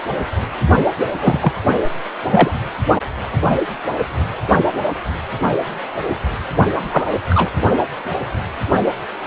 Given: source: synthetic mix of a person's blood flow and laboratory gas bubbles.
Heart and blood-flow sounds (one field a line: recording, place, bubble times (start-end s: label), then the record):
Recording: Doppler ultrasound of blood flow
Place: precordium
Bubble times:
1.12-1.52 s: bubbles
2.31-2.51 s: bubbles
6.74-7.07 s: bubbles
7.29-7.50 s: bubbles
From the record:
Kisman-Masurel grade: 123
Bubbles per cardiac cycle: 1 to 2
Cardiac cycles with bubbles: 10 to 50%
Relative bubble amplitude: loud (0.450 to 0.775)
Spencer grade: 2 (many but less than half of the cardiac periods contain bubble signals, singularly or in groups)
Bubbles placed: only in the low amplitude regions of the cardiac cycle